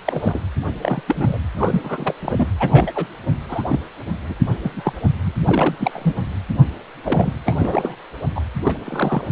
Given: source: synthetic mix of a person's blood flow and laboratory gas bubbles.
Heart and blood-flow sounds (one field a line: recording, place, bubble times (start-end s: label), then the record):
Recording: Doppler ultrasound of blood flow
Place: precordium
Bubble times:
0.04-0.40 s: bubbles
0.81-1.01 s: bubbles
1.07-1.38 s: bubbles
1.56-2.13 s: bubbles
2.20-2.46 s: bubbles
2.59-2.92 s: bubbles
2.94-3.07 s: bubbles
3.48-3.62 s: bubbles
3.67-3.79 s: bubbles
4.29-4.33 s: bubbles
4.60-4.92 s: bubbles
5.24-5.33 s: bubbles
5.44-5.75 s: bubbles
5.79-6.15 s: bubbles
7.04-7.33 s: bubbles
7.45-7.95 s: bubbles
8.36-8.41 s: bubbles
8.63-8.79 s: bubbles
8.85-9.25 s: bubbles
From the record:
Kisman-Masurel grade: 242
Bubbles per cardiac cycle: several, 3 to 8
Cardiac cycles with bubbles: 100%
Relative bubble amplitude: moderate (0.250 to 0.450)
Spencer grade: 3 (all of the cardiac periods contain showers or single bubble signals, but not dominating or overriding the cardiac motion signals)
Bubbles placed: anywhere in the cardiac cycle